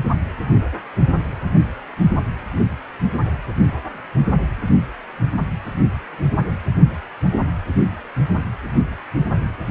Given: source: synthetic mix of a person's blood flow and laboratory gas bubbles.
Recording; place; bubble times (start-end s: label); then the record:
Doppler ultrasound of blood flow; precordium
no bubbles
From the record:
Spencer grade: 0 (complete lack of bubble signals)